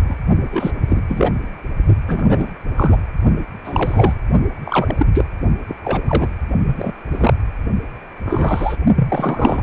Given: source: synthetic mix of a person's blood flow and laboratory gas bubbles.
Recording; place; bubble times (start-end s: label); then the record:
Doppler ultrasound of blood flow; precordium
0.00-0.16 s: bubbles
0.35-0.71 s: bubbles
0.87-1.03 s: bubbles
1.08-1.32 s: bubbles
2.07-2.53 s: bubbles
2.77-2.98 s: bubbles
3.64-4.14 s: bubbles
4.65-5.06 s: bubbles
5.13-5.25 s: bubbles
5.67-5.75 s: bubbles
5.84-6.01 s: bubbles
6.07-6.28 s: bubbles
6.65-6.92 s: bubbles
7.11-7.33 s: bubbles
8.25-8.77 s: bubbles
8.95-9.63 s: bubbles
From the record:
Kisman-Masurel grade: 243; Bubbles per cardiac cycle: several, 3 to 8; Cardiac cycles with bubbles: 100%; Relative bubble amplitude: loud (0.450 to 0.775); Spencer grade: 3 (all of the cardiac periods contain showers or single bubble signals, but not dominating or overriding the cardiac motion signals); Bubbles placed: only in the low amplitude regions of the cardiac cycle